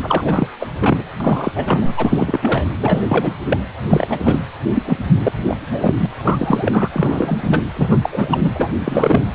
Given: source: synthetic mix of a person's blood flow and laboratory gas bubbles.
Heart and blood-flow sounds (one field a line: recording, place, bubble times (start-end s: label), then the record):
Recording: Doppler ultrasound of blood flow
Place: precordium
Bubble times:
0.02-0.46 s: bubbles
0.59-0.69 s: bubbles
0.79-1.04 s: bubbles
1.20-1.52 s: bubbles
1.56-1.92 s: bubbles
1.96-2.65 s: bubbles
2.78-3.35 s: bubbles
3.50-3.58 s: bubbles
3.88-4.20 s: bubbles
4.23-4.40 s: bubbles
4.73-4.83 s: bubbles
4.85-4.97 s: bubbles
5.20-5.32 s: bubbles
5.46-5.57 s: bubbles
5.59-5.94 s: bubbles
6.00-6.06 s: bubbles
6.14-6.89 s: bubbles
6.92-7.38 s: bubbles
7.41-7.63 s: bubbles
7.76-7.99 s: bubbles
8.01-8.09 s: bubbles
8.12-8.69 s: bubbles
8.85-9.25 s: bubbles
From the record:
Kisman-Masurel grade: 343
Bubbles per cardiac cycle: rolling drumbeat, 9 or more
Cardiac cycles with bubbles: 100%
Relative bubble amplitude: loud (0.450 to 0.775)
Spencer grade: 3 (all of the cardiac periods contain showers or single bubble signals, but not dominating or overriding the cardiac motion signals)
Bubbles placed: anywhere in the cardiac cycle